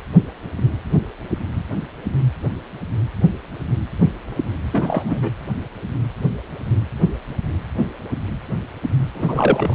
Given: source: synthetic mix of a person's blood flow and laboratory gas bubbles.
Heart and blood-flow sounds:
Doppler ultrasound of blood flow; precordium
4.73-5.30 s: bubbles
9.14-9.75 s: bubbles
From the record:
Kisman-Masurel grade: 212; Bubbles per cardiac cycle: several, 3 to 8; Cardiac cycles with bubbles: 1 to 10%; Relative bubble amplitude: moderate (0.250 to 0.450); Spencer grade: 1 (occasional bubble signal discernible with the cardiac motion signal, with majority of cardiac periods free of bubbles); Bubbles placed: anywhere in the cardiac cycle

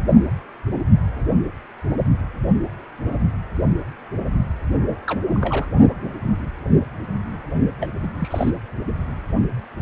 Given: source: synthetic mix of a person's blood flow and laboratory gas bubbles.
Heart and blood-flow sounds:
Doppler ultrasound of blood flow; precordium
5.07-5.19 s: bubbles
5.30-5.67 s: bubbles
7.80-7.88 s: bubbles
8.03-8.07 s: bubbles
8.20-8.51 s: bubbles
From the record:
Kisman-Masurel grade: 221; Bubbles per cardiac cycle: several, 3 to 8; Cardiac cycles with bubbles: 10 to 50%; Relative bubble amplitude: barely perceptible (0.100 to 0.250); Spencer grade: 2 (many but less than half of the cardiac periods contain bubble signals, singularly or in groups); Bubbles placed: only in the low amplitude regions of the cardiac cycle

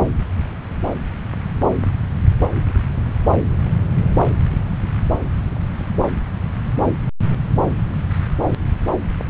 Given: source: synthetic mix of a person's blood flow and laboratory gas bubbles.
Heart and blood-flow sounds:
Doppler ultrasound of blood flow; subclavian vein
no bubbles
From the record:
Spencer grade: 0 (complete lack of bubble signals)

